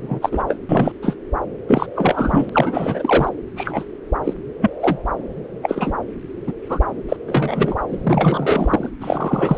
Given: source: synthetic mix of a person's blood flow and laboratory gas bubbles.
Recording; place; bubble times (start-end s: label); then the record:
Doppler ultrasound of blood flow; subclavian vein
0.01-0.43 s: bubbles
0.47-0.57 s: bubbles
0.69-0.92 s: bubbles
1.02-1.16 s: bubbles
1.68-1.86 s: bubbles
1.95-2.50 s: bubbles
2.52-3.29 s: bubbles
3.56-3.84 s: bubbles
4.24-4.33 s: bubbles
4.61-4.71 s: bubbles
4.80-4.98 s: bubbles
5.62-5.93 s: bubbles
6.47-6.53 s: bubbles
6.69-6.79 s: bubbles
7.08-7.17 s: bubbles
7.27-7.76 s: bubbles
7.88-8.90 s: bubbles
9.00-9.57 s: bubbles
From the record:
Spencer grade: 3 (all of the cardiac periods contain showers or single bubble signals, but not dominating or overriding the cardiac motion signals); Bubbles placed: anywhere in the cardiac cycle